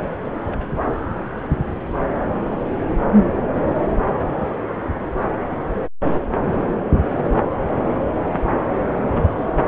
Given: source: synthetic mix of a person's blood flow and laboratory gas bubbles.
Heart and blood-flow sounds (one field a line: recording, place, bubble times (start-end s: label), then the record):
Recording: Doppler ultrasound of blood flow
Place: subclavian vein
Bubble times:
0.46-0.69 s: bubbles
From the record:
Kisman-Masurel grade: 111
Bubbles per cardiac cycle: 1 to 2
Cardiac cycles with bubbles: 1 to 10%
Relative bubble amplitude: barely perceptible (0.100 to 0.250)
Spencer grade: 1 (occasional bubble signal discernible with the cardiac motion signal, with majority of cardiac periods free of bubbles)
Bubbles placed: anywhere in the cardiac cycle